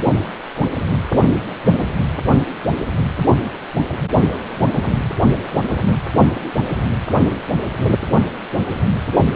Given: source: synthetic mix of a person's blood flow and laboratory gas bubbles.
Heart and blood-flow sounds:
Doppler ultrasound of blood flow; precordium
4.21-4.37 s: bubbles
4.54-4.72 s: bubbles
From the record:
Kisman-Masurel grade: 211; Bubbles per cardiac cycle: several, 3 to 8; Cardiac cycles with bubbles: 1 to 10%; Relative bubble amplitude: barely perceptible (0.100 to 0.250); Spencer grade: 1 (occasional bubble signal discernible with the cardiac motion signal, with majority of cardiac periods free of bubbles); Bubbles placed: anywhere in the cardiac cycle

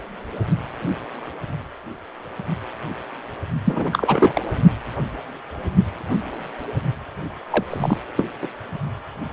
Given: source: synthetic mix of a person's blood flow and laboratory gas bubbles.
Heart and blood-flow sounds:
Doppler ultrasound of blood flow; precordium
3.65-4.42 s: bubbles
7.50-7.64 s: bubbles
7.70-7.98 s: bubbles
8.17-8.26 s: bubbles
8.42-8.48 s: bubbles
From the record:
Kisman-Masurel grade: 222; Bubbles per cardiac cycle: several, 3 to 8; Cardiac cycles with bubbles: 10 to 50%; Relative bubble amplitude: moderate (0.250 to 0.450); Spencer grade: 2 (many but less than half of the cardiac periods contain bubble signals, singularly or in groups); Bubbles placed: only in the low amplitude regions of the cardiac cycle

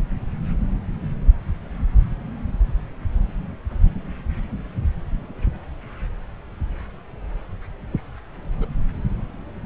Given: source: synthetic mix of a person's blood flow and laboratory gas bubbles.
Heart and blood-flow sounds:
Doppler ultrasound of blood flow; subclavian vein
8.58-8.66 s: bubbles
From the record:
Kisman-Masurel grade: 111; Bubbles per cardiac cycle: 1 to 2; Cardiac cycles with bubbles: 1 to 10%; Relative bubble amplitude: barely perceptible (0.100 to 0.250); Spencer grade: 1 (occasional bubble signal discernible with the cardiac motion signal, with majority of cardiac periods free of bubbles); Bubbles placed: anywhere in the cardiac cycle

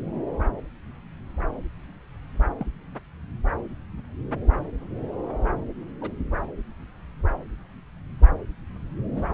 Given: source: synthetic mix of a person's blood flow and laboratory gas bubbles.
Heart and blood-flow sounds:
Doppler ultrasound of blood flow; subclavian vein
2.58-2.67 s: bubbles
6.01-6.11 s: bubbles
9.14-9.25 s: bubbles
From the record:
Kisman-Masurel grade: 121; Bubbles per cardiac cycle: 1 to 2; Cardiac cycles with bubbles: 10 to 50%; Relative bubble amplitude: barely perceptible (0.100 to 0.250); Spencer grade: 2 (many but less than half of the cardiac periods contain bubble signals, singularly or in groups); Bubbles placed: anywhere in the cardiac cycle

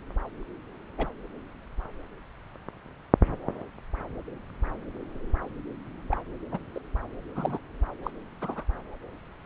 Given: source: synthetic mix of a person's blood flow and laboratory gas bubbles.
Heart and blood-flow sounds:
Doppler ultrasound of blood flow; subclavian vein
0.98-1.06 s: bubbles
6.10-6.20 s: bubbles
6.51-6.58 s: bubbles
6.74-6.79 s: bubbles
7.35-7.58 s: bubbles
8.03-8.11 s: bubbles
8.41-8.63 s: bubbles
From the record:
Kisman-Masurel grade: 121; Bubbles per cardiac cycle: 1 to 2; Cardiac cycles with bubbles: 10 to 50%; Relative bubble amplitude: barely perceptible (0.100 to 0.250); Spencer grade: 2 (many but less than half of the cardiac periods contain bubble signals, singularly or in groups); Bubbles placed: anywhere in the cardiac cycle

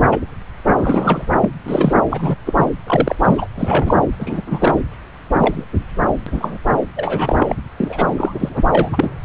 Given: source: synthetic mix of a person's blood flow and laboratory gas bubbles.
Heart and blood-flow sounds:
Doppler ultrasound of blood flow; subclavian vein
0.00-0.18 s: bubbles
0.77-1.26 s: bubbles
1.41-1.50 s: bubbles
1.65-1.95 s: bubbles
2.09-2.36 s: bubbles
2.46-2.67 s: bubbles
2.86-3.16 s: bubbles
3.24-3.47 s: bubbles
3.56-4.04 s: bubbles
4.19-4.41 s: bubbles
4.46-4.75 s: bubbles
5.38-5.64 s: bubbles
6.26-6.58 s: bubbles
6.96-7.37 s: bubbles
7.39-7.55 s: bubbles
7.77-8.57 s: bubbles
8.71-9.10 s: bubbles
From the record:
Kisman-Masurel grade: 233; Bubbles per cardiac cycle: several, 3 to 8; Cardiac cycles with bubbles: 50 to 99%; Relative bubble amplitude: loud (0.450 to 0.775); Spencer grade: 3 (all of the cardiac periods contain showers or single bubble signals, but not dominating or overriding the cardiac motion signals); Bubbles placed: anywhere in the cardiac cycle

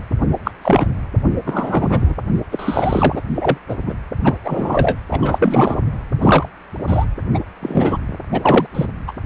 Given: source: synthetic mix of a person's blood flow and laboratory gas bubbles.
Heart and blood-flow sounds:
Doppler ultrasound of blood flow; precordium
0.44-0.51 s: bubbles
0.61-0.88 s: bubbles
1.46-2.14 s: bubbles
2.51-3.21 s: bubbles
3.34-3.58 s: bubbles
3.68-3.78 s: bubbles
3.86-3.93 s: bubbles
4.23-4.34 s: bubbles
4.44-4.97 s: bubbles
5.10-5.81 s: bubbles
6.21-6.49 s: bubbles
6.87-7.06 s: bubbles
7.33-7.39 s: bubbles
7.62-7.97 s: bubbles
8.31-8.67 s: bubbles
8.75-8.86 s: bubbles
9.07-9.12 s: bubbles
From the record:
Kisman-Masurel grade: 243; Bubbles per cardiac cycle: several, 3 to 8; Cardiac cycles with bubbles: 100%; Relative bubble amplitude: loud (0.450 to 0.775); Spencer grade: 3 (all of the cardiac periods contain showers or single bubble signals, but not dominating or overriding the cardiac motion signals); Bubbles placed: anywhere in the cardiac cycle

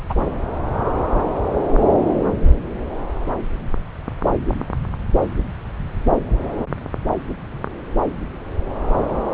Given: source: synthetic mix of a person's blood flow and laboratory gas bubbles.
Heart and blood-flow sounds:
Doppler ultrasound of blood flow; subclavian vein
0.10-0.14 s: bubbles
From the record:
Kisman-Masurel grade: 223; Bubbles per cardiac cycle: several, 3 to 8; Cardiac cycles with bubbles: 10 to 50%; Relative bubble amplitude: loud (0.450 to 0.775); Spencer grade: 2 (many but less than half of the cardiac periods contain bubble signals, singularly or in groups); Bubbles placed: anywhere in the cardiac cycle

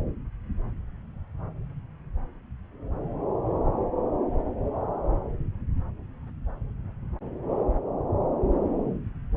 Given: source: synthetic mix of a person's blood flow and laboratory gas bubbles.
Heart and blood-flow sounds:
Doppler ultrasound of blood flow; subclavian vein
no bubbles
From the record:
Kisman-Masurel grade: 000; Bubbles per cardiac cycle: 0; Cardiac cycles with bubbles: 0%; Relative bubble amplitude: no bubbles discernible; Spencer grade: 0 (complete lack of bubble signals)

